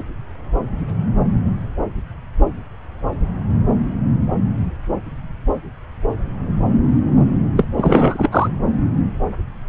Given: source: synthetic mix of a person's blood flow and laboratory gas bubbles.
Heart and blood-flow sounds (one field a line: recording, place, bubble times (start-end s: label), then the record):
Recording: Doppler ultrasound of blood flow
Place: subclavian vein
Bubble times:
7.56-7.67 s: bubbles
7.76-8.47 s: bubbles
From the record:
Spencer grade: 1 (occasional bubble signal discernible with the cardiac motion signal, with majority of cardiac periods free of bubbles)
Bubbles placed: anywhere in the cardiac cycle